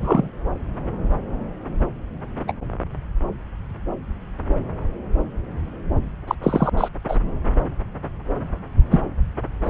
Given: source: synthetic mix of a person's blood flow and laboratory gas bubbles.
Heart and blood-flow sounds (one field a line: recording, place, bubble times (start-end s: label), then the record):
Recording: Doppler ultrasound of blood flow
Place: subclavian vein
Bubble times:
0.00-0.28 s: bubbles
2.48-2.53 s: bubbles
6.27-6.35 s: bubbles
6.42-6.70 s: bubbles
6.77-6.88 s: bubbles
7.08-7.19 s: bubbles
8.90-9.01 s: bubbles
9.65-9.70 s: bubbles
From the record:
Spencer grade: 2 (many but less than half of the cardiac periods contain bubble signals, singularly or in groups)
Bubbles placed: anywhere in the cardiac cycle